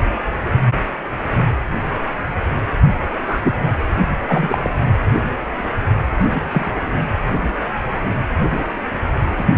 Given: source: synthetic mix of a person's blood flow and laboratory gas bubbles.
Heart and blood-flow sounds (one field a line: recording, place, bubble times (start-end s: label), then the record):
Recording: Doppler ultrasound of blood flow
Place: precordium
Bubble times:
3.27-3.40 s: bubbles
3.43-3.58 s: bubbles
4.28-4.69 s: bubbles
6.27-6.71 s: bubbles
9.37-9.45 s: bubbles
From the record:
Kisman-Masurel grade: 123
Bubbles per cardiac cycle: 1 to 2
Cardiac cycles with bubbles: 10 to 50%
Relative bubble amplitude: loud (0.450 to 0.775)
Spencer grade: 2 (many but less than half of the cardiac periods contain bubble signals, singularly or in groups)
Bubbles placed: anywhere in the cardiac cycle